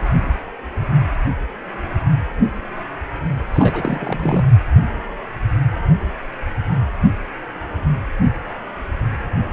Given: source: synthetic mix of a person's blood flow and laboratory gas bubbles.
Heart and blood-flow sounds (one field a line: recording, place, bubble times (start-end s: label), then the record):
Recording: Doppler ultrasound of blood flow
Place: precordium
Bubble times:
3.54-4.45 s: bubbles
From the record:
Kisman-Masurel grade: 212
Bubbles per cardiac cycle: several, 3 to 8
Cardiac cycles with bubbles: 1 to 10%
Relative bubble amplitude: moderate (0.250 to 0.450)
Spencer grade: 1 (occasional bubble signal discernible with the cardiac motion signal, with majority of cardiac periods free of bubbles)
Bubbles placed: anywhere in the cardiac cycle